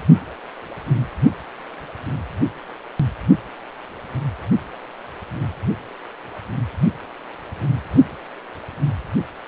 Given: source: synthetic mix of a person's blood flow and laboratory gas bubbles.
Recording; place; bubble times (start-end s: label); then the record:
Doppler ultrasound of blood flow; precordium
no bubbles
From the record:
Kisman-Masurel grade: 000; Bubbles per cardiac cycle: 0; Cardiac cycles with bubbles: 0%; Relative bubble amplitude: no bubbles discernible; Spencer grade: 0 (complete lack of bubble signals)